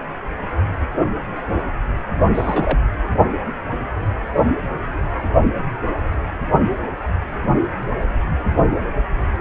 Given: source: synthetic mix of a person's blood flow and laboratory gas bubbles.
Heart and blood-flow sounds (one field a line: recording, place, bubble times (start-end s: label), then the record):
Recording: Doppler ultrasound of blood flow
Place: precordium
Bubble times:
2.34-2.85 s: bubbles
From the record:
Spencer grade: 1 (occasional bubble signal discernible with the cardiac motion signal, with majority of cardiac periods free of bubbles)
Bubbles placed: only in the low amplitude regions of the cardiac cycle